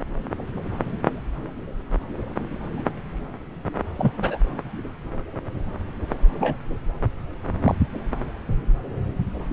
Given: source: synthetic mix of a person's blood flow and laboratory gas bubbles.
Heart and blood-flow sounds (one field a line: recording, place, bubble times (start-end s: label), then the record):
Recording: Doppler ultrasound of blood flow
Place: subclavian vein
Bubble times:
3.98-4.12 s: bubbles
4.18-4.38 s: bubbles
6.41-6.58 s: bubbles
7.62-7.75 s: bubbles
From the record:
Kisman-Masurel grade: 122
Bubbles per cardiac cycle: 1 to 2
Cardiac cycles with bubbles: 10 to 50%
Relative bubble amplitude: moderate (0.250 to 0.450)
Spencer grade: 2 (many but less than half of the cardiac periods contain bubble signals, singularly or in groups)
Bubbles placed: anywhere in the cardiac cycle